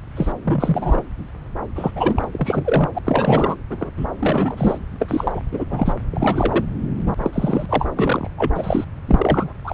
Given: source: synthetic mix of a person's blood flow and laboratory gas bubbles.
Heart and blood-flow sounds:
Doppler ultrasound of blood flow; subclavian vein
0.17-0.32 s: bubbles
0.44-1.03 s: bubbles
1.75-1.91 s: bubbles
1.95-2.28 s: bubbles
2.33-2.90 s: bubbles
2.95-2.99 s: bubbles
3.04-3.56 s: bubbles
3.70-3.91 s: bubbles
3.97-4.07 s: bubbles
4.19-4.79 s: bubbles
4.99-5.40 s: bubbles
5.51-5.94 s: bubbles
6.12-6.65 s: bubbles
7.06-7.12 s: bubbles
7.17-7.66 s: bubbles
7.69-8.30 s: bubbles
8.38-8.85 s: bubbles
9.07-9.53 s: bubbles
9.64-9.74 s: bubbles
From the record:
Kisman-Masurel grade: 242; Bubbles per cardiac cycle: several, 3 to 8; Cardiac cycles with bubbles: 100%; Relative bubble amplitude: moderate (0.250 to 0.450); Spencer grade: 3 (all of the cardiac periods contain showers or single bubble signals, but not dominating or overriding the cardiac motion signals); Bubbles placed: anywhere in the cardiac cycle

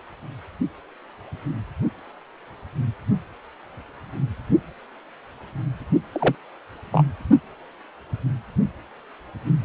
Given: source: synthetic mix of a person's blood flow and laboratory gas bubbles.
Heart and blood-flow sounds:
Doppler ultrasound of blood flow; precordium
6.12-6.35 s: bubbles
6.92-7.04 s: bubbles
From the record:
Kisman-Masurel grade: 122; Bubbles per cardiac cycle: 1 to 2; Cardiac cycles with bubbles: 10 to 50%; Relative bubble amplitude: moderate (0.250 to 0.450); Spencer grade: 2 (many but less than half of the cardiac periods contain bubble signals, singularly or in groups); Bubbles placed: only in the low amplitude regions of the cardiac cycle

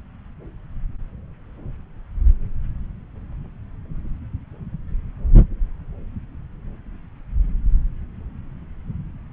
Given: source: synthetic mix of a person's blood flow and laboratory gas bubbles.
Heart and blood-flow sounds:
Doppler ultrasound of blood flow; subclavian vein
no bubbles
From the record:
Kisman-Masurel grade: 000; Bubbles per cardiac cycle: 0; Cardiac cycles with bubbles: 0%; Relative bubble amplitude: no bubbles discernible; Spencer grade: 0 (complete lack of bubble signals)

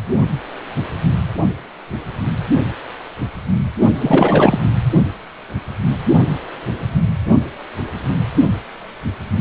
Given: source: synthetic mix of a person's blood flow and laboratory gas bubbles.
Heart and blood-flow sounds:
Doppler ultrasound of blood flow; precordium
4.00-4.58 s: bubbles
From the record:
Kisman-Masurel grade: 213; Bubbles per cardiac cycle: several, 3 to 8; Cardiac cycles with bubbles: 1 to 10%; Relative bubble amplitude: loud (0.450 to 0.775); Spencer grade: 1 (occasional bubble signal discernible with the cardiac motion signal, with majority of cardiac periods free of bubbles); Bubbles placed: only in the low amplitude regions of the cardiac cycle

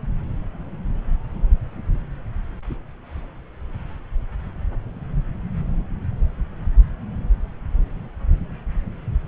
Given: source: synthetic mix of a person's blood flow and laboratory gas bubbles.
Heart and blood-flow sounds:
Doppler ultrasound of blood flow; subclavian vein
no bubbles
From the record:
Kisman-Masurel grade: 000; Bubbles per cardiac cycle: 0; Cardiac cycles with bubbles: 0%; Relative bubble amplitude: no bubbles discernible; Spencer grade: 0 (complete lack of bubble signals)

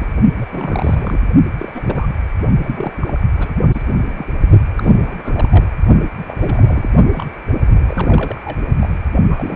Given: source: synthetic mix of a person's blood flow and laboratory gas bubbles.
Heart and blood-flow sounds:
Doppler ultrasound of blood flow; precordium
0.00-0.09 s: bubbles
0.36-0.45 s: bubbles
0.49-1.20 s: bubbles
1.58-2.14 s: bubbles
2.63-2.92 s: bubbles
3.01-3.20 s: bubbles
3.34-3.58 s: bubbles
3.72-3.82 s: bubbles
4.00-4.25 s: bubbles
4.76-4.96 s: bubbles
5.01-5.67 s: bubbles
6.17-6.90 s: bubbles
7.12-7.28 s: bubbles
7.67-8.41 s: bubbles
8.45-8.57 s: bubbles
8.80-8.98 s: bubbles
9.30-9.56 s: bubbles
From the record:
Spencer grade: 3 (all of the cardiac periods contain showers or single bubble signals, but not dominating or overriding the cardiac motion signals); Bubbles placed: only in the low amplitude regions of the cardiac cycle

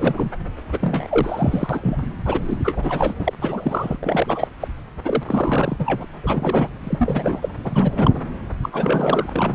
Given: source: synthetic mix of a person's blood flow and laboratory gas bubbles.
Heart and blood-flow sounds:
Doppler ultrasound of blood flow; subclavian vein
0.00-0.32 s: bubbles
0.71-2.07 s: bubbles
2.25-2.57 s: bubbles
2.64-3.13 s: bubbles
3.19-3.33 s: bubbles
3.40-3.97 s: bubbles
4.01-4.47 s: bubbles
4.60-4.68 s: bubbles
5.04-6.05 s: bubbles
6.23-6.69 s: bubbles
6.83-7.49 s: bubbles
7.64-8.21 s: bubbles
8.63-8.69 s: bubbles
8.72-9.29 s: bubbles
9.32-9.55 s: bubbles
From the record:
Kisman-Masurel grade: 342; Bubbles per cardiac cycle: rolling drumbeat, 9 or more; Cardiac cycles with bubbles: 100%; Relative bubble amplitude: moderate (0.250 to 0.450); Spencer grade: 3 (all of the cardiac periods contain showers or single bubble signals, but not dominating or overriding the cardiac motion signals); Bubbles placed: anywhere in the cardiac cycle

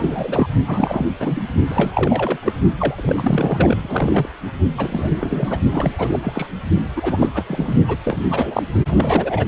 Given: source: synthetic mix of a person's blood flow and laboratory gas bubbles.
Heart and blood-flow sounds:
Doppler ultrasound of blood flow; precordium
0.00-0.49 s: bubbles
0.66-1.06 s: bubbles
1.19-1.40 s: bubbles
1.67-2.40 s: bubbles
2.42-2.52 s: bubbles
2.77-4.29 s: bubbles
4.77-5.60 s: bubbles
5.72-6.19 s: bubbles
6.22-6.46 s: bubbles
6.96-7.29 s: bubbles
7.34-7.43 s: bubbles
7.48-7.75 s: bubbles
7.88-7.97 s: bubbles
8.05-8.22 s: bubbles
8.29-8.63 s: bubbles
8.88-9.46 s: bubbles
From the record:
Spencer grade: 3 (all of the cardiac periods contain showers or single bubble signals, but not dominating or overriding the cardiac motion signals); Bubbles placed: only in the low amplitude regions of the cardiac cycle

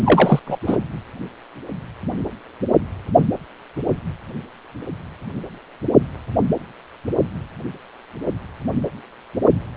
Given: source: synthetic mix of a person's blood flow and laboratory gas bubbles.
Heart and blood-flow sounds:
Doppler ultrasound of blood flow; precordium
0.04-0.40 s: bubbles
0.47-0.57 s: bubbles
0.67-0.78 s: bubbles
From the record:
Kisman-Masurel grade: 213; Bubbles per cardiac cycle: several, 3 to 8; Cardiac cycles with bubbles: 1 to 10%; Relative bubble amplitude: loud (0.450 to 0.775); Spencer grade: 1 (occasional bubble signal discernible with the cardiac motion signal, with majority of cardiac periods free of bubbles); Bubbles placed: only in the low amplitude regions of the cardiac cycle

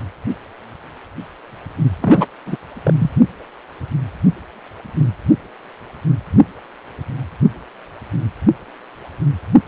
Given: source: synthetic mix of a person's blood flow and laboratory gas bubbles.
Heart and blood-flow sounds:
Doppler ultrasound of blood flow; precordium
2.01-2.26 s: bubbles
2.46-2.56 s: bubbles
2.84-2.94 s: bubbles
2.98-3.10 s: bubbles
From the record:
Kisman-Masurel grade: 213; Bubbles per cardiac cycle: several, 3 to 8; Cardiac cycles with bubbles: 1 to 10%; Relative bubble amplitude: loud (0.450 to 0.775); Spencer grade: 1 (occasional bubble signal discernible with the cardiac motion signal, with majority of cardiac periods free of bubbles); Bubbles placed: anywhere in the cardiac cycle

